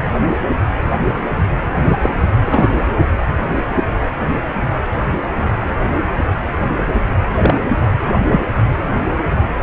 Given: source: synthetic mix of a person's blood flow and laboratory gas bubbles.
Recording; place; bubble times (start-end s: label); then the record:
Doppler ultrasound of blood flow; precordium
1.84-1.97 s: bubbles
2.02-2.09 s: bubbles
2.42-2.74 s: bubbles
7.37-7.54 s: bubbles
8.31-8.41 s: bubbles
From the record:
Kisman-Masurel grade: 123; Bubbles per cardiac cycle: 1 to 2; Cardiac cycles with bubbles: 10 to 50%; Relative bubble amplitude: loud (0.450 to 0.775); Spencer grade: 2 (many but less than half of the cardiac periods contain bubble signals, singularly or in groups); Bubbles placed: anywhere in the cardiac cycle